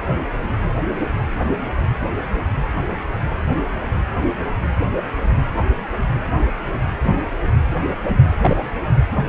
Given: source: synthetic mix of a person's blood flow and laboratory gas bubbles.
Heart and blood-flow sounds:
Doppler ultrasound of blood flow; precordium
8.41-8.56 s: bubbles
From the record:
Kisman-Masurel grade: 112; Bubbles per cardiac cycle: 1 to 2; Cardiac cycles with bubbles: 1 to 10%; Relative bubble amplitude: moderate (0.250 to 0.450); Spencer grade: 1 (occasional bubble signal discernible with the cardiac motion signal, with majority of cardiac periods free of bubbles); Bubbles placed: anywhere in the cardiac cycle

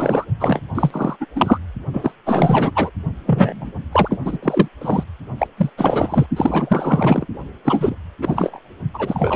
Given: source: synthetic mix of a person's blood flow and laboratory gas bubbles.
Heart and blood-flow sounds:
Doppler ultrasound of blood flow; precordium
0.00-0.25 s: bubbles
0.40-0.61 s: bubbles
0.75-1.17 s: bubbles
1.20-1.26 s: bubbles
1.35-1.59 s: bubbles
1.93-2.13 s: bubbles
2.26-2.71 s: bubbles
2.74-2.90 s: bubbles
3.25-3.72 s: bubbles
3.92-4.20 s: bubbles
4.25-4.38 s: bubbles
4.42-4.68 s: bubbles
4.81-5.04 s: bubbles
5.38-5.47 s: bubbles
5.56-5.70 s: bubbles
5.77-6.26 s: bubbles
6.36-7.26 s: bubbles
7.64-7.95 s: bubbles
8.21-8.60 s: bubbles
8.94-9.36 s: bubbles
From the record:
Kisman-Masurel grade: 444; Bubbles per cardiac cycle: continuous sound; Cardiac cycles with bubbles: 100%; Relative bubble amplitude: maximal (0.775 to 0.999); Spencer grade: 4 (maximum detectable bubble signal sounding continuously throughout systole and diastole of every cardiac period, and overriding the amplitude of the normal cardiac signals); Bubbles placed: only in the low amplitude regions of the cardiac cycle

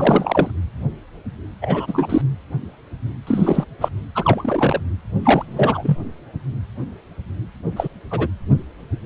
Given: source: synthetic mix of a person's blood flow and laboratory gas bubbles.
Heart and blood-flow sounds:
Doppler ultrasound of blood flow; precordium
0.00-0.51 s: bubbles
1.61-2.21 s: bubbles
3.26-3.65 s: bubbles
3.80-3.88 s: bubbles
4.15-4.80 s: bubbles
5.19-5.98 s: bubbles
7.76-7.88 s: bubbles
8.11-8.28 s: bubbles
From the record:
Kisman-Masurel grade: 222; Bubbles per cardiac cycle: several, 3 to 8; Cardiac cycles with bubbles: 10 to 50%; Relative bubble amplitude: moderate (0.250 to 0.450); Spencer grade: 2 (many but less than half of the cardiac periods contain bubble signals, singularly or in groups); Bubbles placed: anywhere in the cardiac cycle

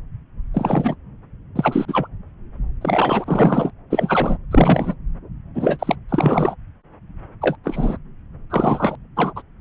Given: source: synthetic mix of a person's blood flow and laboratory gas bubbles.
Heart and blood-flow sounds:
Doppler ultrasound of blood flow; subclavian vein
0.54-0.95 s: bubbles
1.56-1.85 s: bubbles
1.88-2.08 s: bubbles
2.81-3.71 s: bubbles
3.90-4.38 s: bubbles
4.51-4.96 s: bubbles
5.54-5.96 s: bubbles
6.09-6.55 s: bubbles
7.41-7.57 s: bubbles
7.64-7.97 s: bubbles
8.50-8.96 s: bubbles
9.16-9.33 s: bubbles
9.35-9.42 s: bubbles
From the record:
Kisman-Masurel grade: 233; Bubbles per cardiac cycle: several, 3 to 8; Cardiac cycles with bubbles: 50 to 99%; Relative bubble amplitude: loud (0.450 to 0.775); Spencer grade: 3 (all of the cardiac periods contain showers or single bubble signals, but not dominating or overriding the cardiac motion signals); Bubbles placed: anywhere in the cardiac cycle

